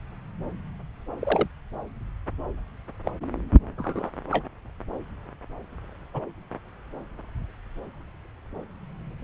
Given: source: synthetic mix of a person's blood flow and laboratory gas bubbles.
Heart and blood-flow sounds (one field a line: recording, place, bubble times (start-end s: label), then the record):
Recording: Doppler ultrasound of blood flow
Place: subclavian vein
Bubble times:
1.19-1.47 s: bubbles
3.04-3.11 s: bubbles
3.78-4.10 s: bubbles
4.31-4.45 s: bubbles
6.13-6.21 s: bubbles
From the record:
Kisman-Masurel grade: 122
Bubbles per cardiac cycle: 1 to 2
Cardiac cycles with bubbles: 10 to 50%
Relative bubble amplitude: moderate (0.250 to 0.450)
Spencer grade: 2 (many but less than half of the cardiac periods contain bubble signals, singularly or in groups)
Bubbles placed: anywhere in the cardiac cycle